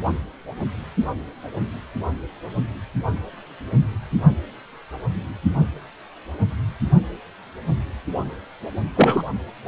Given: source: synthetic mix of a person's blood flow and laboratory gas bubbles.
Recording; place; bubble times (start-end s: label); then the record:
Doppler ultrasound of blood flow; precordium
8.96-9.23 s: bubbles
From the record:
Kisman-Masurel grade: 223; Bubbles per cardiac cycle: several, 3 to 8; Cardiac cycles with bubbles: 10 to 50%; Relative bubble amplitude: loud (0.450 to 0.775); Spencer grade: 2 (many but less than half of the cardiac periods contain bubble signals, singularly or in groups); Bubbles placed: only in the low amplitude regions of the cardiac cycle